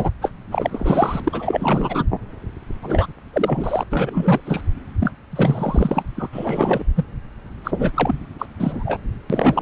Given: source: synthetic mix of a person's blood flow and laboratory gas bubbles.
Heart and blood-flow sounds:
Doppler ultrasound of blood flow; subclavian vein
0.00-0.10 s: bubbles
0.21-0.30 s: bubbles
0.51-1.20 s: bubbles
1.24-2.06 s: bubbles
2.83-3.06 s: bubbles
3.33-3.83 s: bubbles
3.90-4.40 s: bubbles
4.45-4.62 s: bubbles
5.00-5.11 s: bubbles
5.32-6.03 s: bubbles
6.16-6.29 s: bubbles
6.32-6.84 s: bubbles
6.96-7.05 s: bubbles
7.64-7.71 s: bubbles
7.74-7.91 s: bubbles
7.95-8.14 s: bubbles
8.38-8.46 s: bubbles
8.58-9.02 s: bubbles
9.29-9.62 s: bubbles
From the record:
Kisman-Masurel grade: 342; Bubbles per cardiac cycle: rolling drumbeat, 9 or more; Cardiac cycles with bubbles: 100%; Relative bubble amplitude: moderate (0.250 to 0.450); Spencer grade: 3 (all of the cardiac periods contain showers or single bubble signals, but not dominating or overriding the cardiac motion signals); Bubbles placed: anywhere in the cardiac cycle

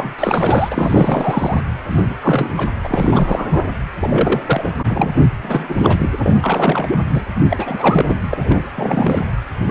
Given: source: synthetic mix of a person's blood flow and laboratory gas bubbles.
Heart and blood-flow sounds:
Doppler ultrasound of blood flow; precordium
0.00-0.14 s: bubbles
0.18-1.61 s: bubbles
1.90-2.18 s: bubbles
2.22-2.68 s: bubbles
2.83-3.65 s: bubbles
4.00-4.42 s: bubbles
4.46-4.72 s: bubbles
4.84-5.10 s: bubbles
5.42-6.10 s: bubbles
6.24-6.98 s: bubbles
7.10-7.25 s: bubbles
7.49-8.05 s: bubbles
8.08-8.15 s: bubbles
8.32-8.62 s: bubbles
8.76-9.26 s: bubbles
9.68-9.70 s: bubbles
From the record:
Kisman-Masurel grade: 343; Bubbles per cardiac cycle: rolling drumbeat, 9 or more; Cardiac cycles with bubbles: 100%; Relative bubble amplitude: loud (0.450 to 0.775); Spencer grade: 3 (all of the cardiac periods contain showers or single bubble signals, but not dominating or overriding the cardiac motion signals); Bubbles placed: anywhere in the cardiac cycle

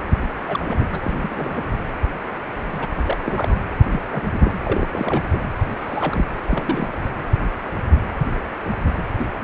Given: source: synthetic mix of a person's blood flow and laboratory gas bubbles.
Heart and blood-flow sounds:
Doppler ultrasound of blood flow; precordium
0.48-0.85 s: bubbles
0.92-1.00 s: bubbles
1.04-1.63 s: bubbles
2.71-2.86 s: bubbles
3.02-3.54 s: bubbles
3.91-4.00 s: bubbles
4.12-4.22 s: bubbles
4.32-4.53 s: bubbles
4.63-4.87 s: bubbles
4.92-5.38 s: bubbles
5.75-6.25 s: bubbles
6.43-6.89 s: bubbles
9.17-9.25 s: bubbles
9.41-9.44 s: bubbles
From the record:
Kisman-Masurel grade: 232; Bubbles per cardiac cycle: several, 3 to 8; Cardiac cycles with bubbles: 50 to 99%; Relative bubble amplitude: moderate (0.250 to 0.450); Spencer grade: 3 (all of the cardiac periods contain showers or single bubble signals, but not dominating or overriding the cardiac motion signals); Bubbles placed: anywhere in the cardiac cycle

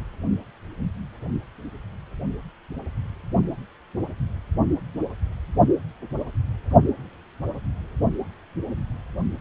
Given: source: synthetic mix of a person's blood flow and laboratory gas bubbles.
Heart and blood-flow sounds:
Doppler ultrasound of blood flow; precordium
no bubbles
From the record:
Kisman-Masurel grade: 000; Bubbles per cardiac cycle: 0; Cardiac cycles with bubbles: 0%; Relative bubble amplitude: no bubbles discernible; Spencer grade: 0 (complete lack of bubble signals)

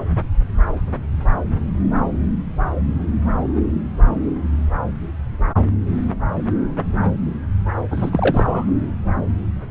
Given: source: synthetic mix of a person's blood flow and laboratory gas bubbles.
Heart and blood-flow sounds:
Doppler ultrasound of blood flow; subclavian vein
7.91-8.66 s: bubbles
From the record:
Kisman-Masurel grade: 213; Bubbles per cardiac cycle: several, 3 to 8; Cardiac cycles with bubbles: 1 to 10%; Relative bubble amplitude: loud (0.450 to 0.775); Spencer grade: 1 (occasional bubble signal discernible with the cardiac motion signal, with majority of cardiac periods free of bubbles); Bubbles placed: anywhere in the cardiac cycle

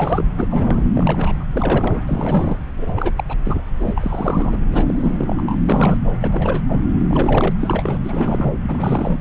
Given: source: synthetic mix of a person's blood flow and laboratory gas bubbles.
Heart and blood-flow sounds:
Doppler ultrasound of blood flow; subclavian vein
0.00-0.24 s: bubbles
0.37-0.48 s: bubbles
0.50-0.82 s: bubbles
0.93-1.44 s: bubbles
1.51-2.01 s: bubbles
2.06-2.56 s: bubbles
2.81-3.14 s: bubbles
3.17-3.24 s: bubbles
3.28-3.37 s: bubbles
3.44-3.61 s: bubbles
3.79-4.59 s: bubbles
4.71-5.56 s: bubbles
5.68-5.97 s: bubbles
6.21-6.61 s: bubbles
6.68-6.80 s: bubbles
7.09-7.51 s: bubbles
7.60-7.98 s: bubbles
8.04-8.53 s: bubbles
8.62-9.19 s: bubbles
From the record:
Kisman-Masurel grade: 342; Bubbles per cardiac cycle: rolling drumbeat, 9 or more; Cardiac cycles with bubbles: 100%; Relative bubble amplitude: moderate (0.250 to 0.450); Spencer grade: 3 (all of the cardiac periods contain showers or single bubble signals, but not dominating or overriding the cardiac motion signals); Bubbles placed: anywhere in the cardiac cycle

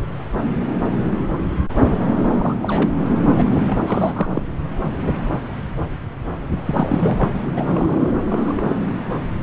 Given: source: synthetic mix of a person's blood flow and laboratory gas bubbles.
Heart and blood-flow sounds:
Doppler ultrasound of blood flow; subclavian vein
2.17-2.56 s: bubbles
2.62-2.94 s: bubbles
3.33-3.45 s: bubbles
3.67-3.79 s: bubbles
3.86-4.43 s: bubbles
6.66-7.29 s: bubbles
7.55-7.67 s: bubbles
7.70-8.12 s: bubbles
8.28-8.76 s: bubbles
From the record:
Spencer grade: 2 (many but less than half of the cardiac periods contain bubble signals, singularly or in groups); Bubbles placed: anywhere in the cardiac cycle

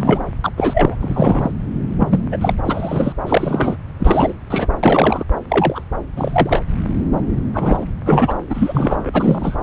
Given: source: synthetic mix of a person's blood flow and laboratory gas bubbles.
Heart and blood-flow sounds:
Doppler ultrasound of blood flow; subclavian vein
0.00-0.26 s: bubbles
0.44-0.51 s: bubbles
0.56-0.96 s: bubbles
1.01-1.51 s: bubbles
1.99-2.20 s: bubbles
2.31-2.37 s: bubbles
2.40-2.53 s: bubbles
2.65-3.13 s: bubbles
3.25-3.76 s: bubbles
4.00-4.34 s: bubbles
4.50-4.67 s: bubbles
4.83-5.23 s: bubbles
5.50-5.84 s: bubbles
6.16-6.62 s: bubbles
7.54-7.86 s: bubbles
8.06-8.38 s: bubbles
8.50-9.56 s: bubbles
From the record:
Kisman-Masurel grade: 243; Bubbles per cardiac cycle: several, 3 to 8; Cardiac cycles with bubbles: 100%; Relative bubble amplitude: loud (0.450 to 0.775); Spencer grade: 3 (all of the cardiac periods contain showers or single bubble signals, but not dominating or overriding the cardiac motion signals); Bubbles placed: anywhere in the cardiac cycle

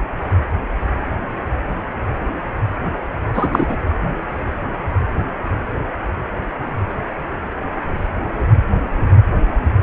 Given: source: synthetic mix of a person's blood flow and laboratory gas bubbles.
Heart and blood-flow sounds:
Doppler ultrasound of blood flow; precordium
3.33-3.75 s: bubbles
From the record:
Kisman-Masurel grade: 213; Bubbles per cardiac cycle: several, 3 to 8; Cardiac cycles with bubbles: 1 to 10%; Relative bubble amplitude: loud (0.450 to 0.775); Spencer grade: 1 (occasional bubble signal discernible with the cardiac motion signal, with majority of cardiac periods free of bubbles); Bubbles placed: anywhere in the cardiac cycle

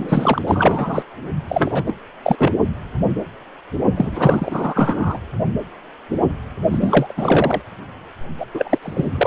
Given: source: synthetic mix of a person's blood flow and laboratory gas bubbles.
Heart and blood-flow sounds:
Doppler ultrasound of blood flow; precordium
0.00-0.42 s: bubbles
0.47-1.04 s: bubbles
1.48-1.84 s: bubbles
1.86-1.93 s: bubbles
2.22-2.36 s: bubbles
2.38-2.52 s: bubbles
3.96-5.19 s: bubbles
6.71-7.62 s: bubbles
8.39-8.45 s: bubbles
8.54-8.79 s: bubbles
8.82-9.07 s: bubbles
9.15-9.26 s: bubbles
From the record:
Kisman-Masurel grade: 333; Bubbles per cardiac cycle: rolling drumbeat, 9 or more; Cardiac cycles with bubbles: 50 to 99%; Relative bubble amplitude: loud (0.450 to 0.775); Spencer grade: 3 (all of the cardiac periods contain showers or single bubble signals, but not dominating or overriding the cardiac motion signals); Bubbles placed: only in the low amplitude regions of the cardiac cycle

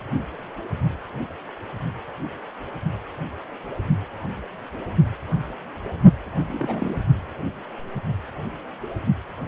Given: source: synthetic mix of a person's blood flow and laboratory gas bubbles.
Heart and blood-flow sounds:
Doppler ultrasound of blood flow; precordium
6.49-7.00 s: bubbles
From the record:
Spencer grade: 2 (many but less than half of the cardiac periods contain bubble signals, singularly or in groups); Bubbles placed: only in the low amplitude regions of the cardiac cycle

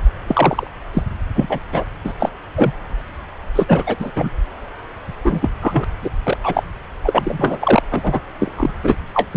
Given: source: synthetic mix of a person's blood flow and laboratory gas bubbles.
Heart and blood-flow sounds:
Doppler ultrasound of blood flow; subclavian vein
0.27-0.67 s: bubbles
0.93-1.02 s: bubbles
1.35-1.59 s: bubbles
1.72-1.84 s: bubbles
2.04-2.12 s: bubbles
2.19-2.29 s: bubbles
2.56-2.72 s: bubbles
3.55-3.96 s: bubbles
4.00-4.11 s: bubbles
4.16-4.29 s: bubbles
5.24-5.50 s: bubbles
5.61-5.85 s: bubbles
6.02-6.11 s: bubbles
6.24-6.38 s: bubbles
6.43-6.63 s: bubbles
7.04-7.82 s: bubbles
7.92-8.20 s: bubbles
8.39-8.52 s: bubbles
8.55-8.71 s: bubbles
8.83-8.95 s: bubbles
9.14-9.28 s: bubbles
9.31-9.37 s: bubbles
From the record:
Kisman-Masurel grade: 243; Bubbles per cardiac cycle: several, 3 to 8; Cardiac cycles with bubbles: 100%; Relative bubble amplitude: loud (0.450 to 0.775); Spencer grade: 3 (all of the cardiac periods contain showers or single bubble signals, but not dominating or overriding the cardiac motion signals); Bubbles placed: anywhere in the cardiac cycle

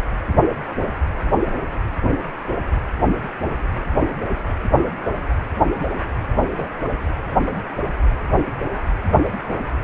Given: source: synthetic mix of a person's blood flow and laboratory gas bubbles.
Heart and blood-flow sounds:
Doppler ultrasound of blood flow; precordium
6.40-6.49 s: bubbles
6.57-6.75 s: bubbles
From the record:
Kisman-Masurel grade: 111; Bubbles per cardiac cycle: 1 to 2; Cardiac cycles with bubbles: 1 to 10%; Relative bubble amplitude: barely perceptible (0.100 to 0.250); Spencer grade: 1 (occasional bubble signal discernible with the cardiac motion signal, with majority of cardiac periods free of bubbles); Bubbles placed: anywhere in the cardiac cycle

